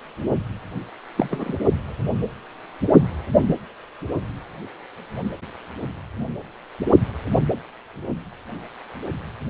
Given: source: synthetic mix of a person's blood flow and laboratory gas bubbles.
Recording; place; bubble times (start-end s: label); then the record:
Doppler ultrasound of blood flow; precordium
1.16-1.57 s: bubbles
From the record:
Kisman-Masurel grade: 212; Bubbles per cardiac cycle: several, 3 to 8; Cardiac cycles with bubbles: 1 to 10%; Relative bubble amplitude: moderate (0.250 to 0.450); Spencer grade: 1 (occasional bubble signal discernible with the cardiac motion signal, with majority of cardiac periods free of bubbles); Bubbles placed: only in the low amplitude regions of the cardiac cycle